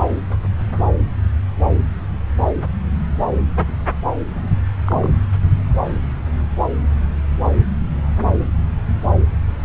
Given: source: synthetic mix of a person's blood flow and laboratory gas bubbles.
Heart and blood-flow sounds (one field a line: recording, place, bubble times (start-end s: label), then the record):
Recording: Doppler ultrasound of blood flow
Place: subclavian vein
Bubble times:
4.86-5.19 s: bubbles
From the record:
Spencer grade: 2 (many but less than half of the cardiac periods contain bubble signals, singularly or in groups)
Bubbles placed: anywhere in the cardiac cycle